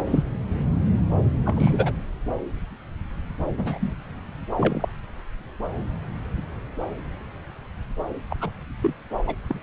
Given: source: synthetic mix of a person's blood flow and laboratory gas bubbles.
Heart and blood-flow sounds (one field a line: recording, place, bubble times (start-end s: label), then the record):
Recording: Doppler ultrasound of blood flow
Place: subclavian vein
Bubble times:
0.07-0.23 s: bubbles
1.45-1.93 s: bubbles
3.58-3.79 s: bubbles
3.81-3.94 s: bubbles
4.56-4.86 s: bubbles
8.30-8.35 s: bubbles
8.40-8.50 s: bubbles
8.80-8.93 s: bubbles
9.26-9.35 s: bubbles
9.48-9.59 s: bubbles
From the record:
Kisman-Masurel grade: 221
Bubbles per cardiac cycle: several, 3 to 8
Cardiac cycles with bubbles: 10 to 50%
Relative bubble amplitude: barely perceptible (0.100 to 0.250)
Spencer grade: 2 (many but less than half of the cardiac periods contain bubble signals, singularly or in groups)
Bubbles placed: anywhere in the cardiac cycle